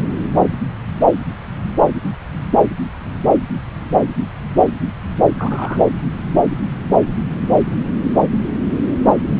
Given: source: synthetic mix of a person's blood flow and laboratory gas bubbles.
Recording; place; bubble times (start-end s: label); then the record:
Doppler ultrasound of blood flow; subclavian vein
5.38-5.80 s: bubbles
From the record:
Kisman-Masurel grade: 112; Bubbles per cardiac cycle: 1 to 2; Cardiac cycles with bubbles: 1 to 10%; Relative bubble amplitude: moderate (0.250 to 0.450); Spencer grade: 1 (occasional bubble signal discernible with the cardiac motion signal, with majority of cardiac periods free of bubbles); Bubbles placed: anywhere in the cardiac cycle